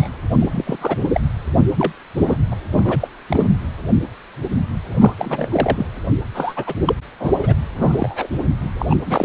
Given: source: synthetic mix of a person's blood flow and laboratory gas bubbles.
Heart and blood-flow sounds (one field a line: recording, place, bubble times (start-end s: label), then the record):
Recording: Doppler ultrasound of blood flow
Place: precordium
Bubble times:
0.00-0.08 s: bubbles
0.39-0.77 s: bubbles
0.80-0.98 s: bubbles
1.14-1.20 s: bubbles
1.76-1.92 s: bubbles
2.17-2.37 s: bubbles
2.52-2.56 s: bubbles
2.73-3.08 s: bubbles
3.29-3.50 s: bubbles
5.00-5.13 s: bubbles
5.19-5.48 s: bubbles
5.51-5.86 s: bubbles
6.34-6.75 s: bubbles
6.85-6.93 s: bubbles
7.20-7.31 s: bubbles
7.41-7.54 s: bubbles
7.75-8.27 s: bubbles
8.79-8.86 s: bubbles
8.89-8.96 s: bubbles
9.05-9.25 s: bubbles
From the record:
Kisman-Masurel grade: 232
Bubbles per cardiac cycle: several, 3 to 8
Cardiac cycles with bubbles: 50 to 99%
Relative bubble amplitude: moderate (0.250 to 0.450)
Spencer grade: 3 (all of the cardiac periods contain showers or single bubble signals, but not dominating or overriding the cardiac motion signals)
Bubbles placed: anywhere in the cardiac cycle